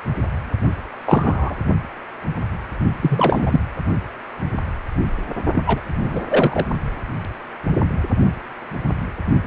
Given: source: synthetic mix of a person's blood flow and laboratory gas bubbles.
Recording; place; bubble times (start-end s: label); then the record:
Doppler ultrasound of blood flow; precordium
1.06-1.56 s: bubbles
3.01-3.60 s: bubbles
5.54-5.62 s: bubbles
5.66-5.81 s: bubbles
5.99-6.21 s: bubbles
6.29-6.66 s: bubbles
From the record:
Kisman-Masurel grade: 223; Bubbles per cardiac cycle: several, 3 to 8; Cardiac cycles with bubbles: 10 to 50%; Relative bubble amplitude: loud (0.450 to 0.775); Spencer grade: 2 (many but less than half of the cardiac periods contain bubble signals, singularly or in groups); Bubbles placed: only in the low amplitude regions of the cardiac cycle